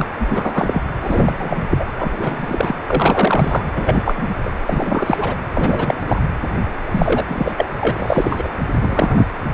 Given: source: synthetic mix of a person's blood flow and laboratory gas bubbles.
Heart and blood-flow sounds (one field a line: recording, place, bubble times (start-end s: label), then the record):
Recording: Doppler ultrasound of blood flow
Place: precordium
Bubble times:
0.00-0.05 s: bubbles
0.18-0.80 s: bubbles
1.03-1.64 s: bubbles
1.70-1.85 s: bubbles
1.97-2.11 s: bubbles
2.17-2.75 s: bubbles
2.88-3.69 s: bubbles
3.74-4.29 s: bubbles
4.45-4.50 s: bubbles
4.67-5.35 s: bubbles
5.54-6.32 s: bubbles
6.91-7.52 s: bubbles
7.57-7.66 s: bubbles
7.80-8.48 s: bubbles
8.81-9.29 s: bubbles
From the record:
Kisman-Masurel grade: 343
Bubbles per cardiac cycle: rolling drumbeat, 9 or more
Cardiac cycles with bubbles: 100%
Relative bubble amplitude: loud (0.450 to 0.775)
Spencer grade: 3 (all of the cardiac periods contain showers or single bubble signals, but not dominating or overriding the cardiac motion signals)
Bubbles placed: anywhere in the cardiac cycle